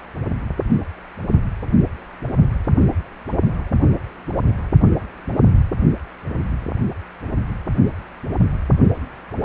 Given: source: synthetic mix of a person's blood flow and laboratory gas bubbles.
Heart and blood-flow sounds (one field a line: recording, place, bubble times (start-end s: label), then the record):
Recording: Doppler ultrasound of blood flow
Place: precordium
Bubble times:
no bubbles
From the record:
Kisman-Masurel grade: 000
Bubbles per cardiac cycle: 0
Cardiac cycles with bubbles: 0%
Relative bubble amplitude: no bubbles discernible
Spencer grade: 0 (complete lack of bubble signals)